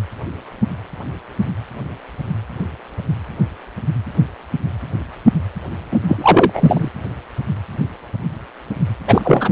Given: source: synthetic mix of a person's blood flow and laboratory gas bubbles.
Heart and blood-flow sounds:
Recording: Doppler ultrasound of blood flow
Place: precordium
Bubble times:
5.92-5.98 s: bubbles
6.07-6.89 s: bubbles
9.07-9.52 s: bubbles
From the record:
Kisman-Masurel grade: 223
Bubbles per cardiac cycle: several, 3 to 8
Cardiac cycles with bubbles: 10 to 50%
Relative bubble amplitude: loud (0.450 to 0.775)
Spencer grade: 2 (many but less than half of the cardiac periods contain bubble signals, singularly or in groups)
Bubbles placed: anywhere in the cardiac cycle

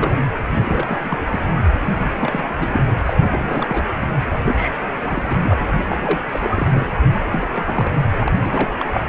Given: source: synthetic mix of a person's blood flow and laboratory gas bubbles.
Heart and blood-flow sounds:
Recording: Doppler ultrasound of blood flow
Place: precordium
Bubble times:
0.00-0.13 s: bubbles
0.59-1.18 s: bubbles
1.30-1.40 s: bubbles
1.54-1.63 s: bubbles
1.83-2.44 s: bubbles
2.59-2.67 s: bubbles
2.73-2.95 s: bubbles
3.06-3.13 s: bubbles
3.18-3.84 s: bubbles
4.34-4.79 s: bubbles
4.86-4.93 s: bubbles
5.00-5.36 s: bubbles
5.42-5.66 s: bubbles
5.89-6.20 s: bubbles
6.29-6.87 s: bubbles
7.30-7.48 s: bubbles
7.53-7.97 s: bubbles
8.13-8.29 s: bubbles
8.34-8.74 s: bubbles
8.78-9.09 s: bubbles
From the record:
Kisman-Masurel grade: 342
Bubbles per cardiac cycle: rolling drumbeat, 9 or more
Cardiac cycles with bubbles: 100%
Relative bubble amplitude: moderate (0.250 to 0.450)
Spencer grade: 3 (all of the cardiac periods contain showers or single bubble signals, but not dominating or overriding the cardiac motion signals)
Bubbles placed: anywhere in the cardiac cycle

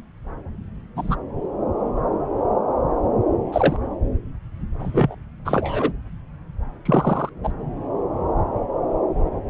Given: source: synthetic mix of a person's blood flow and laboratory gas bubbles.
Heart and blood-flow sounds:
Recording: Doppler ultrasound of blood flow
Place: subclavian vein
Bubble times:
0.96-1.16 s: bubbles
3.52-3.77 s: bubbles
4.79-5.15 s: bubbles
5.45-5.92 s: bubbles
6.85-7.29 s: bubbles
7.43-7.52 s: bubbles
From the record:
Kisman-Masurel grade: 123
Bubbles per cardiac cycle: 1 to 2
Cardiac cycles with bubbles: 10 to 50%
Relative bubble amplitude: loud (0.450 to 0.775)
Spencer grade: 2 (many but less than half of the cardiac periods contain bubble signals, singularly or in groups)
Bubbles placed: anywhere in the cardiac cycle

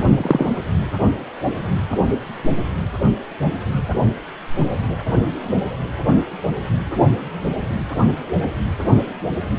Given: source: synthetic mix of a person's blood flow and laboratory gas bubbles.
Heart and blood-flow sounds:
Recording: Doppler ultrasound of blood flow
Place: precordium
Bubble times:
0.17-0.49 s: bubbles
From the record:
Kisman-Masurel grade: 113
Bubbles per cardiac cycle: 1 to 2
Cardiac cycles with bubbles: 1 to 10%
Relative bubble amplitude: loud (0.450 to 0.775)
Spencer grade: 1 (occasional bubble signal discernible with the cardiac motion signal, with majority of cardiac periods free of bubbles)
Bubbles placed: only in the low amplitude regions of the cardiac cycle

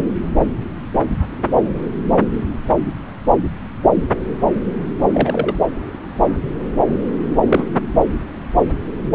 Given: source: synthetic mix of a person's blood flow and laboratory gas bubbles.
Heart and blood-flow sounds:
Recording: Doppler ultrasound of blood flow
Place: subclavian vein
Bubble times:
5.13-5.54 s: bubbles
7.46-7.65 s: bubbles
From the record:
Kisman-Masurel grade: 122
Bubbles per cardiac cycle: 1 to 2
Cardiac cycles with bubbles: 10 to 50%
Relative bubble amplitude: moderate (0.250 to 0.450)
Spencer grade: 2 (many but less than half of the cardiac periods contain bubble signals, singularly or in groups)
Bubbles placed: anywhere in the cardiac cycle

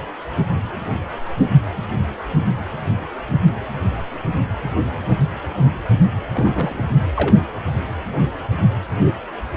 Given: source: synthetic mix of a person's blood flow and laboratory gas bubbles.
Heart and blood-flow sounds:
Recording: Doppler ultrasound of blood flow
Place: precordium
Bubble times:
6.32-6.84 s: bubbles
7.15-7.36 s: bubbles
From the record:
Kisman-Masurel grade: 212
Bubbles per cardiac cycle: several, 3 to 8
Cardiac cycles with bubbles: 1 to 10%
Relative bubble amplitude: moderate (0.250 to 0.450)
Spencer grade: 1 (occasional bubble signal discernible with the cardiac motion signal, with majority of cardiac periods free of bubbles)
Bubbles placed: anywhere in the cardiac cycle

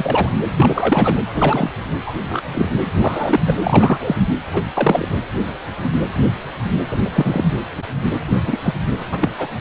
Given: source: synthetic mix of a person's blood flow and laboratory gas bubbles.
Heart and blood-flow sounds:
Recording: Doppler ultrasound of blood flow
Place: precordium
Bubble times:
0.00-0.29 s: bubbles
0.56-1.21 s: bubbles
1.34-1.70 s: bubbles
2.07-2.12 s: bubbles
2.29-2.43 s: bubbles
2.54-2.69 s: bubbles
3.01-3.40 s: bubbles
3.47-3.54 s: bubbles
3.62-3.99 s: bubbles
4.02-4.21 s: bubbles
4.53-4.62 s: bubbles
4.75-5.08 s: bubbles
6.91-6.98 s: bubbles
7.04-7.09 s: bubbles
7.13-7.54 s: bubbles
8.42-8.60 s: bubbles
8.63-8.73 s: bubbles
9.00-9.02 s: bubbles
9.11-9.31 s: bubbles
9.38-9.47 s: bubbles
From the record:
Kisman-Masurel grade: 233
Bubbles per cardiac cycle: several, 3 to 8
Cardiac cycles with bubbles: 50 to 99%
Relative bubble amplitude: loud (0.450 to 0.775)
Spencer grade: 3 (all of the cardiac periods contain showers or single bubble signals, but not dominating or overriding the cardiac motion signals)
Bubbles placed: anywhere in the cardiac cycle

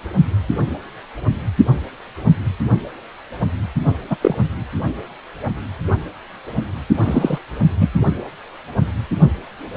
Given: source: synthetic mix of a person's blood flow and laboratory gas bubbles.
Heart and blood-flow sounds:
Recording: Doppler ultrasound of blood flow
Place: precordium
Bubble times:
4.10-4.17 s: bubbles
4.21-4.35 s: bubbles
6.98-7.38 s: bubbles
7.80-7.88 s: bubbles
From the record:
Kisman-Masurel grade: 123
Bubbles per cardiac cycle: 1 to 2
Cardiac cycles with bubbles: 10 to 50%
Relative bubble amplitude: loud (0.450 to 0.775)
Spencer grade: 2 (many but less than half of the cardiac periods contain bubble signals, singularly or in groups)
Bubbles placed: only in the low amplitude regions of the cardiac cycle

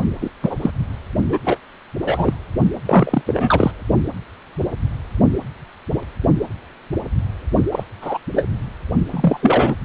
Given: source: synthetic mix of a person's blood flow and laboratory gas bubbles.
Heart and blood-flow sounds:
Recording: Doppler ultrasound of blood flow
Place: precordium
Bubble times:
0.21-0.30 s: bubbles
0.42-0.56 s: bubbles
0.61-0.71 s: bubbles
1.28-1.38 s: bubbles
1.44-1.57 s: bubbles
2.01-2.33 s: bubbles
2.85-3.21 s: bubbles
3.27-3.71 s: bubbles
7.71-7.83 s: bubbles
8.02-8.18 s: bubbles
8.33-8.45 s: bubbles
9.11-9.38 s: bubbles
9.42-9.74 s: bubbles
From the record:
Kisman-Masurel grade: 233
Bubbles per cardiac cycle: several, 3 to 8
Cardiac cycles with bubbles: 50 to 99%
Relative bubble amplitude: loud (0.450 to 0.775)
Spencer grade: 3 (all of the cardiac periods contain showers or single bubble signals, but not dominating or overriding the cardiac motion signals)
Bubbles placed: only in the low amplitude regions of the cardiac cycle

